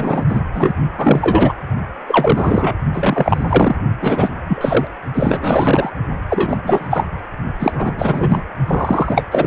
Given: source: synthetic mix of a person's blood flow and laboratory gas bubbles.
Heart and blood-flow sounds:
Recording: Doppler ultrasound of blood flow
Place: precordium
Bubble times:
0.00-0.26 s: bubbles
0.29-0.41 s: bubbles
0.54-0.73 s: bubbles
0.97-1.54 s: bubbles
2.07-2.75 s: bubbles
2.94-3.76 s: bubbles
4.01-4.29 s: bubbles
4.48-4.87 s: bubbles
5.14-5.91 s: bubbles
6.29-6.57 s: bubbles
6.63-7.10 s: bubbles
7.60-7.93 s: bubbles
7.96-8.43 s: bubbles
8.67-9.22 s: bubbles
9.31-9.46 s: bubbles
From the record:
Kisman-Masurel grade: 343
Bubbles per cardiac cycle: rolling drumbeat, 9 or more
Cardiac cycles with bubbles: 100%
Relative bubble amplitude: loud (0.450 to 0.775)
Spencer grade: 3 (all of the cardiac periods contain showers or single bubble signals, but not dominating or overriding the cardiac motion signals)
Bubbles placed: only in the low amplitude regions of the cardiac cycle

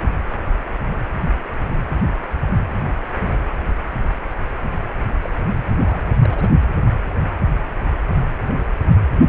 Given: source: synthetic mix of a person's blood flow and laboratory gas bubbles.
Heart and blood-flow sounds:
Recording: Doppler ultrasound of blood flow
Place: precordium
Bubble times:
5.22-5.30 s: bubbles
5.40-5.46 s: bubbles
5.79-6.13 s: bubbles
6.21-6.49 s: bubbles
From the record:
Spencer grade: 1 (occasional bubble signal discernible with the cardiac motion signal, with majority of cardiac periods free of bubbles)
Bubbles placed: only in the low amplitude regions of the cardiac cycle

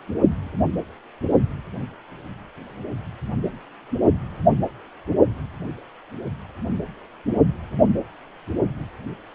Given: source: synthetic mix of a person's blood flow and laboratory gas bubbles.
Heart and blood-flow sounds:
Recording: Doppler ultrasound of blood flow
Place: precordium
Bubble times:
no bubbles
From the record:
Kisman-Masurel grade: 000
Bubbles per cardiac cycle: 0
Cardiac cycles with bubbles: 0%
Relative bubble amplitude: no bubbles discernible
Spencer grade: 0 (complete lack of bubble signals)

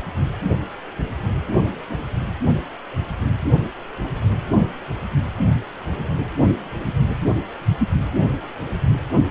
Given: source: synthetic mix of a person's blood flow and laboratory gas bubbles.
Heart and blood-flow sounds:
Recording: Doppler ultrasound of blood flow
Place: precordium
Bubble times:
no bubbles
From the record:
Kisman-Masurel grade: 000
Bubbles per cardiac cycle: 0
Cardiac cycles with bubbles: 0%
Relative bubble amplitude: no bubbles discernible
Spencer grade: 0 (complete lack of bubble signals)

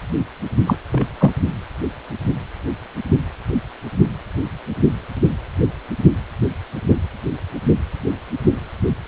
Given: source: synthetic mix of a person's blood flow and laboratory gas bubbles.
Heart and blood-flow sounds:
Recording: Doppler ultrasound of blood flow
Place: precordium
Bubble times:
0.67-0.76 s: bubbles
0.92-1.06 s: bubbles
1.20-1.31 s: bubbles
From the record:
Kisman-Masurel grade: 213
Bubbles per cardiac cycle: several, 3 to 8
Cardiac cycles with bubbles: 1 to 10%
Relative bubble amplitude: loud (0.450 to 0.775)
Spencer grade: 1 (occasional bubble signal discernible with the cardiac motion signal, with majority of cardiac periods free of bubbles)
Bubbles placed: only in the low amplitude regions of the cardiac cycle

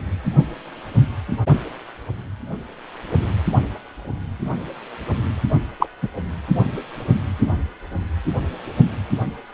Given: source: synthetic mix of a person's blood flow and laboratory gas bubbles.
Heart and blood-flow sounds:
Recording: Doppler ultrasound of blood flow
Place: precordium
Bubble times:
5.79-5.87 s: bubbles
6.03-6.08 s: bubbles
From the record:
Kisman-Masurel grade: 123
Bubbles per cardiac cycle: 1 to 2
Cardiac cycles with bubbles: 10 to 50%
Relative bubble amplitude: loud (0.450 to 0.775)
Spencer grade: 2 (many but less than half of the cardiac periods contain bubble signals, singularly or in groups)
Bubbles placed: anywhere in the cardiac cycle

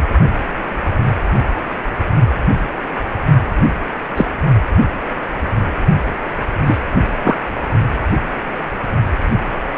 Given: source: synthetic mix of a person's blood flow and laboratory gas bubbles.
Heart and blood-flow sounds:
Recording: Doppler ultrasound of blood flow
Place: precordium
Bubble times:
4.16-4.26 s: bubbles
6.67-6.79 s: bubbles
7.24-7.36 s: bubbles
From the record:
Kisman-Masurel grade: 123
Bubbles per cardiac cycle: 1 to 2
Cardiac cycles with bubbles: 10 to 50%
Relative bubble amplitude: loud (0.450 to 0.775)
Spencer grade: 2 (many but less than half of the cardiac periods contain bubble signals, singularly or in groups)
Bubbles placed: only in the low amplitude regions of the cardiac cycle

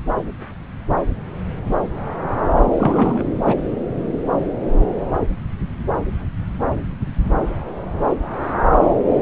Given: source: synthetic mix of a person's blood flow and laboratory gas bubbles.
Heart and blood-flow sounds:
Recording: Doppler ultrasound of blood flow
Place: subclavian vein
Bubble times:
2.79-3.27 s: bubbles
3.46-3.55 s: bubbles
From the record:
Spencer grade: 1 (occasional bubble signal discernible with the cardiac motion signal, with majority of cardiac periods free of bubbles)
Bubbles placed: anywhere in the cardiac cycle

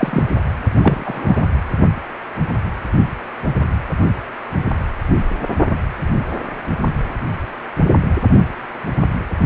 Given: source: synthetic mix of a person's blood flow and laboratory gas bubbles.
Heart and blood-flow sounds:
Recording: Doppler ultrasound of blood flow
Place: precordium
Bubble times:
0.00-0.22 s: bubbles
0.83-1.43 s: bubbles
From the record:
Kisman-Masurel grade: 123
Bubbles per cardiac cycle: 1 to 2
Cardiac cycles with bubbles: 10 to 50%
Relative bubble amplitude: loud (0.450 to 0.775)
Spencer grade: 2 (many but less than half of the cardiac periods contain bubble signals, singularly or in groups)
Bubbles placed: only in the low amplitude regions of the cardiac cycle

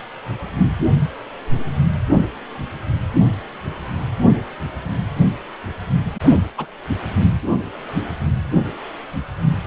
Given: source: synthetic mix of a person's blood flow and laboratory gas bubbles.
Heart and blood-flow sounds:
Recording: Doppler ultrasound of blood flow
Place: precordium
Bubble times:
6.22-6.39 s: bubbles
6.57-6.67 s: bubbles
From the record:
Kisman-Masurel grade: 111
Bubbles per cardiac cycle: 1 to 2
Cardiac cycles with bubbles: 1 to 10%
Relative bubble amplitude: barely perceptible (0.100 to 0.250)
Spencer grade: 1 (occasional bubble signal discernible with the cardiac motion signal, with majority of cardiac periods free of bubbles)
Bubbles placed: anywhere in the cardiac cycle

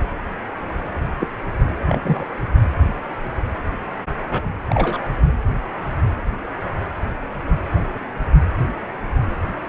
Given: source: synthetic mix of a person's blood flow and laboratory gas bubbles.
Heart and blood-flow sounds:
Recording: Doppler ultrasound of blood flow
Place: precordium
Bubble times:
1.20-1.27 s: bubbles
1.88-2.25 s: bubbles
4.32-4.41 s: bubbles
4.70-4.99 s: bubbles
From the record:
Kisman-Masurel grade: 122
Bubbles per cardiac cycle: 1 to 2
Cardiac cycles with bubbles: 10 to 50%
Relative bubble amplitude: moderate (0.250 to 0.450)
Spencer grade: 2 (many but less than half of the cardiac periods contain bubble signals, singularly or in groups)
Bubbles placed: anywhere in the cardiac cycle

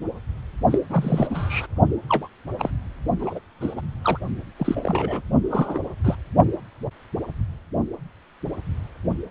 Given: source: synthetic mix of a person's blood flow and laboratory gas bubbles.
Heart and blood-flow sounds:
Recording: Doppler ultrasound of blood flow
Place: precordium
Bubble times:
0.71-0.78 s: bubbles
0.89-1.27 s: bubbles
1.30-1.67 s: bubbles
2.08-2.27 s: bubbles
2.58-2.70 s: bubbles
3.19-3.39 s: bubbles
3.60-3.74 s: bubbles
3.76-3.81 s: bubbles
4.02-4.20 s: bubbles
4.56-5.21 s: bubbles
5.50-5.80 s: bubbles
6.04-6.16 s: bubbles
From the record:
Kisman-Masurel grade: 232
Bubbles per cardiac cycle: several, 3 to 8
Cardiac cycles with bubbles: 50 to 99%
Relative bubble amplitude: moderate (0.250 to 0.450)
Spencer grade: 3 (all of the cardiac periods contain showers or single bubble signals, but not dominating or overriding the cardiac motion signals)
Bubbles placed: only in the low amplitude regions of the cardiac cycle

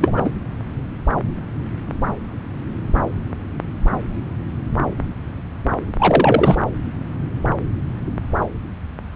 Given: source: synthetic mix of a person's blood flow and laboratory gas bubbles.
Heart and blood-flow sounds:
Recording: Doppler ultrasound of blood flow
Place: subclavian vein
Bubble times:
0.01-0.30 s: bubbles
5.98-6.56 s: bubbles
From the record:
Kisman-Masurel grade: 223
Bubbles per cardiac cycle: several, 3 to 8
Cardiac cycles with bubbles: 10 to 50%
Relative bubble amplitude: loud (0.450 to 0.775)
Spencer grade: 2 (many but less than half of the cardiac periods contain bubble signals, singularly or in groups)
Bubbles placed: anywhere in the cardiac cycle

